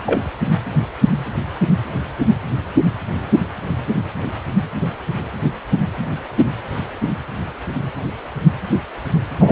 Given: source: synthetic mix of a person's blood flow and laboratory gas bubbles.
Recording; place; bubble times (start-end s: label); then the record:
Doppler ultrasound of blood flow; precordium
0.06-0.23 s: bubbles
9.39-9.52 s: bubbles
From the record:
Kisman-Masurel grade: 113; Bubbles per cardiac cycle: 1 to 2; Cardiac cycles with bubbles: 1 to 10%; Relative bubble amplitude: loud (0.450 to 0.775); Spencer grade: 1 (occasional bubble signal discernible with the cardiac motion signal, with majority of cardiac periods free of bubbles); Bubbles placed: anywhere in the cardiac cycle